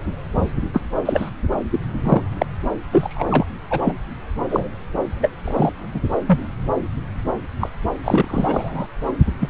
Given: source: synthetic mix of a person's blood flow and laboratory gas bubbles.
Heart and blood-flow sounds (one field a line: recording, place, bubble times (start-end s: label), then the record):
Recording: Doppler ultrasound of blood flow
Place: subclavian vein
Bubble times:
0.73-0.82 s: bubbles
1.05-1.30 s: bubbles
1.72-1.80 s: bubbles
2.03-2.22 s: bubbles
2.39-2.46 s: bubbles
2.92-3.24 s: bubbles
3.27-3.46 s: bubbles
3.70-3.95 s: bubbles
4.50-4.68 s: bubbles
5.21-5.31 s: bubbles
5.44-5.72 s: bubbles
5.94-6.00 s: bubbles
6.27-6.38 s: bubbles
7.60-7.69 s: bubbles
8.03-8.87 s: bubbles
9.39-9.48 s: bubbles
From the record:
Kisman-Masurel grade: 232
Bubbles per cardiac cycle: several, 3 to 8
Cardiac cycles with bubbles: 50 to 99%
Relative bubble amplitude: moderate (0.250 to 0.450)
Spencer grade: 3 (all of the cardiac periods contain showers or single bubble signals, but not dominating or overriding the cardiac motion signals)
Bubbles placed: anywhere in the cardiac cycle